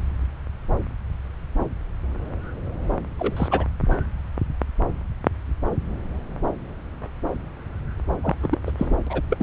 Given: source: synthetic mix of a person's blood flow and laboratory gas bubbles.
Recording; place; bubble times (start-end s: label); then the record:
Doppler ultrasound of blood flow; subclavian vein
3.19-3.66 s: bubbles
8.23-8.35 s: bubbles
8.43-8.59 s: bubbles
8.66-8.71 s: bubbles
8.79-8.94 s: bubbles
9.06-9.21 s: bubbles
9.29-9.43 s: bubbles
From the record:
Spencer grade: 2 (many but less than half of the cardiac periods contain bubble signals, singularly or in groups); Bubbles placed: anywhere in the cardiac cycle